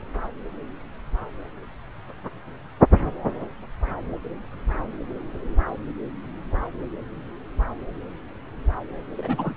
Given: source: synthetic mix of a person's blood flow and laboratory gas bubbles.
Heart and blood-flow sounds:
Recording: Doppler ultrasound of blood flow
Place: subclavian vein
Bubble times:
9.17-9.54 s: bubbles
From the record:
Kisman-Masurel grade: 211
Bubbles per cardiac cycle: several, 3 to 8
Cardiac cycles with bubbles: 1 to 10%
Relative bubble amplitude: barely perceptible (0.100 to 0.250)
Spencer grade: 1 (occasional bubble signal discernible with the cardiac motion signal, with majority of cardiac periods free of bubbles)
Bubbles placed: anywhere in the cardiac cycle

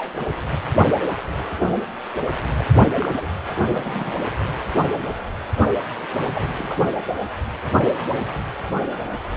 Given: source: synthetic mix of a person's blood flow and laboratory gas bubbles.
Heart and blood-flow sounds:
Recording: Doppler ultrasound of blood flow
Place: precordium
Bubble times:
0.00-0.13 s: bubbles
2.59-2.64 s: bubbles
2.79-2.88 s: bubbles
3.00-3.27 s: bubbles
3.68-4.14 s: bubbles
6.34-6.45 s: bubbles
6.58-6.82 s: bubbles
From the record:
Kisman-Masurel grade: 121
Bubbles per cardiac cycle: 1 to 2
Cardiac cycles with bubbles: 10 to 50%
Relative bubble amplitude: barely perceptible (0.100 to 0.250)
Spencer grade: 2 (many but less than half of the cardiac periods contain bubble signals, singularly or in groups)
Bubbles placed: anywhere in the cardiac cycle

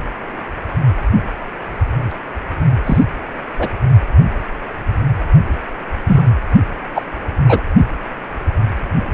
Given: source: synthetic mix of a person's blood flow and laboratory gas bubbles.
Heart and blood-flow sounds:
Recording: Doppler ultrasound of blood flow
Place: precordium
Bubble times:
2.86-3.04 s: bubbles
3.59-3.69 s: bubbles
6.07-6.23 s: bubbles
6.95-7.04 s: bubbles
7.48-7.61 s: bubbles
From the record:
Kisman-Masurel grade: 123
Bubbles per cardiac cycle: 1 to 2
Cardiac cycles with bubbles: 10 to 50%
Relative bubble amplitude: loud (0.450 to 0.775)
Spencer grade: 2 (many but less than half of the cardiac periods contain bubble signals, singularly or in groups)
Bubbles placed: only in the low amplitude regions of the cardiac cycle

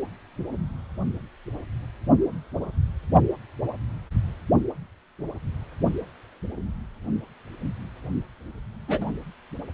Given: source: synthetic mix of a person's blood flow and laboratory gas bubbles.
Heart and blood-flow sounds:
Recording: Doppler ultrasound of blood flow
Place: precordium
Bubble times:
8.88-9.12 s: bubbles
From the record:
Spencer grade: 1 (occasional bubble signal discernible with the cardiac motion signal, with majority of cardiac periods free of bubbles)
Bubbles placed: only in the low amplitude regions of the cardiac cycle

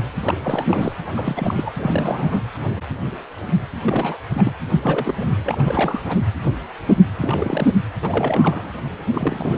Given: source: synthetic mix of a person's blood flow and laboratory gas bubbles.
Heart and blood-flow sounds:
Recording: Doppler ultrasound of blood flow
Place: precordium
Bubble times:
0.00-0.09 s: bubbles
0.23-0.34 s: bubbles
0.42-0.95 s: bubbles
1.00-1.04 s: bubbles
1.17-1.72 s: bubbles
1.77-2.44 s: bubbles
3.84-4.18 s: bubbles
4.30-4.53 s: bubbles
4.81-5.14 s: bubbles
5.19-5.31 s: bubbles
5.45-6.02 s: bubbles
6.08-6.18 s: bubbles
7.20-7.79 s: bubbles
8.02-8.72 s: bubbles
9.10-9.58 s: bubbles
From the record:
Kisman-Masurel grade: 332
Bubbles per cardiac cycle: rolling drumbeat, 9 or more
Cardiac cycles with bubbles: 50 to 99%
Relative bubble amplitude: moderate (0.250 to 0.450)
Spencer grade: 3 (all of the cardiac periods contain showers or single bubble signals, but not dominating or overriding the cardiac motion signals)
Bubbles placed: anywhere in the cardiac cycle

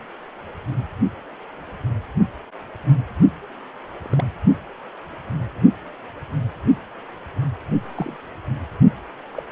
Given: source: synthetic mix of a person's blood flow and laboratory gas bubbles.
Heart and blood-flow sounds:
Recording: Doppler ultrasound of blood flow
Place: precordium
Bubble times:
3.96-3.99 s: bubbles
4.01-4.07 s: bubbles
4.12-4.33 s: bubbles
7.95-8.17 s: bubbles
9.34-9.43 s: bubbles
From the record:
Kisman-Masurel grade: 121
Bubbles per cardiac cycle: 1 to 2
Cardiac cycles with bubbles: 10 to 50%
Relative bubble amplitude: barely perceptible (0.100 to 0.250)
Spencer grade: 2 (many but less than half of the cardiac periods contain bubble signals, singularly or in groups)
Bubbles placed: only in the low amplitude regions of the cardiac cycle

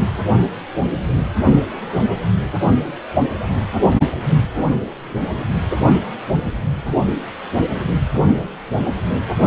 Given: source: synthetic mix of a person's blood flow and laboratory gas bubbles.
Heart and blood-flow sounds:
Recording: Doppler ultrasound of blood flow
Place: precordium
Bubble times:
0.00-0.08 s: bubbles
From the record:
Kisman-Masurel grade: 211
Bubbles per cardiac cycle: several, 3 to 8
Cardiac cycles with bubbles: 1 to 10%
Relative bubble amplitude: barely perceptible (0.100 to 0.250)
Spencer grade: 1 (occasional bubble signal discernible with the cardiac motion signal, with majority of cardiac periods free of bubbles)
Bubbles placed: only in the low amplitude regions of the cardiac cycle

